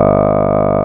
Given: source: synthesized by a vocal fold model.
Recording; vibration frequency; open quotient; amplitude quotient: sustained vowel; 50 Hz; 0.2; 1.2